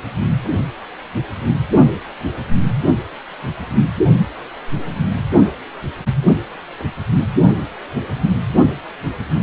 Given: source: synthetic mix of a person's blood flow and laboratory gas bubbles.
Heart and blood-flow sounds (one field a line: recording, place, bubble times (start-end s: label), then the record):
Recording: Doppler ultrasound of blood flow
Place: precordium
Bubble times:
no bubbles
From the record:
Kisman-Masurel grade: 000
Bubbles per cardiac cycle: 0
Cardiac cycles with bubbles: 0%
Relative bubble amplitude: no bubbles discernible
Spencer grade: 0 (complete lack of bubble signals)